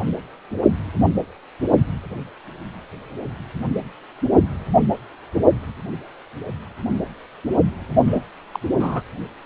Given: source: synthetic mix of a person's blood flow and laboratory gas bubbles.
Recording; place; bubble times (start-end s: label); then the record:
Doppler ultrasound of blood flow; precordium
8.07-8.24 s: bubbles
8.52-8.60 s: bubbles
8.79-9.02 s: bubbles
From the record:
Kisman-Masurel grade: 222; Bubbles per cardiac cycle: several, 3 to 8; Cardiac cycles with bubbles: 10 to 50%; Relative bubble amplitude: moderate (0.250 to 0.450); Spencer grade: 2 (many but less than half of the cardiac periods contain bubble signals, singularly or in groups); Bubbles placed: only in the low amplitude regions of the cardiac cycle